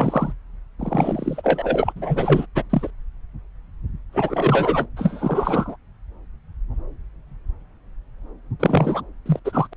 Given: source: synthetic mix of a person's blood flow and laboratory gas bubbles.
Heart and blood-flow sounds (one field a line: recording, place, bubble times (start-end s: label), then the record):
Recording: Doppler ultrasound of blood flow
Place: subclavian vein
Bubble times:
0.00-0.33 s: bubbles
0.79-1.92 s: bubbles
1.96-2.46 s: bubbles
2.55-2.63 s: bubbles
2.69-2.91 s: bubbles
4.12-4.87 s: bubbles
4.96-5.76 s: bubbles
8.59-9.01 s: bubbles
9.25-9.39 s: bubbles
9.44-9.67 s: bubbles
9.71-9.73 s: bubbles
From the record:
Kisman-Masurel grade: 333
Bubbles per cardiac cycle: rolling drumbeat, 9 or more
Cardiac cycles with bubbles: 50 to 99%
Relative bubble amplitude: loud (0.450 to 0.775)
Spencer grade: 3 (all of the cardiac periods contain showers or single bubble signals, but not dominating or overriding the cardiac motion signals)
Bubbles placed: anywhere in the cardiac cycle